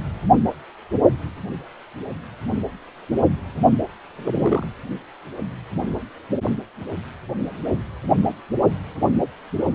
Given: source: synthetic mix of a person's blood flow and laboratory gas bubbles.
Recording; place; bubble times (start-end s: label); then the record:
Doppler ultrasound of blood flow; precordium
4.17-4.65 s: bubbles
From the record:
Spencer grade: 1 (occasional bubble signal discernible with the cardiac motion signal, with majority of cardiac periods free of bubbles); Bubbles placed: only in the low amplitude regions of the cardiac cycle